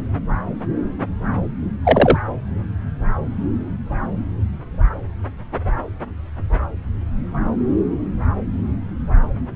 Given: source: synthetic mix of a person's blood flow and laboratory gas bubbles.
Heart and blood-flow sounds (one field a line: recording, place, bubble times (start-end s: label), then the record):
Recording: Doppler ultrasound of blood flow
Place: subclavian vein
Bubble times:
1.85-2.18 s: bubbles
From the record:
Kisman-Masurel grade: 123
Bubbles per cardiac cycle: 1 to 2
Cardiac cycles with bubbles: 10 to 50%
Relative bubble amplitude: loud (0.450 to 0.775)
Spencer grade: 2 (many but less than half of the cardiac periods contain bubble signals, singularly or in groups)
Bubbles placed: anywhere in the cardiac cycle